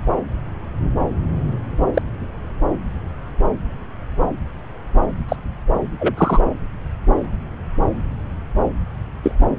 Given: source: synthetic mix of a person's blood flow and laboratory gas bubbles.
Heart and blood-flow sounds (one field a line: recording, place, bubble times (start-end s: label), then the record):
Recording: Doppler ultrasound of blood flow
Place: subclavian vein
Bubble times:
1.94-2.02 s: bubbles
5.28-5.36 s: bubbles
6.00-6.15 s: bubbles
6.17-6.41 s: bubbles
9.23-9.31 s: bubbles
From the record:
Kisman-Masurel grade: 123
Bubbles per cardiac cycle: 1 to 2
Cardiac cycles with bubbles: 10 to 50%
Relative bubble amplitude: loud (0.450 to 0.775)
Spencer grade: 2 (many but less than half of the cardiac periods contain bubble signals, singularly or in groups)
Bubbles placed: anywhere in the cardiac cycle